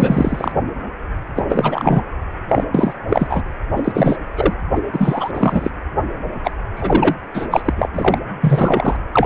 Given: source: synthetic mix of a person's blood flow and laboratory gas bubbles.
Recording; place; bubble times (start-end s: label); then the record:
Doppler ultrasound of blood flow; precordium
0.00-0.51 s: bubbles
1.35-1.43 s: bubbles
1.49-2.01 s: bubbles
2.49-2.64 s: bubbles
2.75-2.93 s: bubbles
3.08-3.42 s: bubbles
3.76-4.17 s: bubbles
4.37-4.54 s: bubbles
4.75-4.81 s: bubbles
4.92-5.31 s: bubbles
5.34-5.70 s: bubbles
6.43-6.51 s: bubbles
6.75-7.15 s: bubbles
7.34-7.47 s: bubbles
7.50-7.73 s: bubbles
7.76-7.89 s: bubbles
7.93-8.18 s: bubbles
8.41-8.96 s: bubbles
9.12-9.26 s: bubbles
From the record:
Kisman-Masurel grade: 343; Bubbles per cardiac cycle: rolling drumbeat, 9 or more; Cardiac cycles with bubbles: 100%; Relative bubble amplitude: loud (0.450 to 0.775); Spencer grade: 3 (all of the cardiac periods contain showers or single bubble signals, but not dominating or overriding the cardiac motion signals); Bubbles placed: anywhere in the cardiac cycle